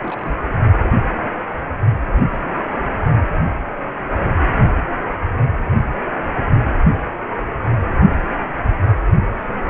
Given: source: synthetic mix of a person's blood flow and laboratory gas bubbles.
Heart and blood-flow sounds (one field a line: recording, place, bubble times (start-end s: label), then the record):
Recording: Doppler ultrasound of blood flow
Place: precordium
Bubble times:
0.01-0.38 s: bubbles
2.31-2.46 s: bubbles
9.66-9.70 s: bubbles
From the record:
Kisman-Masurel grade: 121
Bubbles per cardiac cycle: 1 to 2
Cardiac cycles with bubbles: 10 to 50%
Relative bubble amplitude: barely perceptible (0.100 to 0.250)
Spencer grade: 2 (many but less than half of the cardiac periods contain bubble signals, singularly or in groups)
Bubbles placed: anywhere in the cardiac cycle